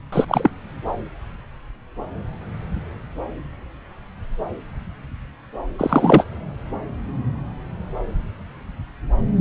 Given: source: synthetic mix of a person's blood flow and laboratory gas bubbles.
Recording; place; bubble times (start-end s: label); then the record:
Doppler ultrasound of blood flow; subclavian vein
0.12-0.25 s: bubbles
0.28-0.50 s: bubbles
5.79-6.24 s: bubbles
From the record:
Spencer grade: 1 (occasional bubble signal discernible with the cardiac motion signal, with majority of cardiac periods free of bubbles); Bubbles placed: anywhere in the cardiac cycle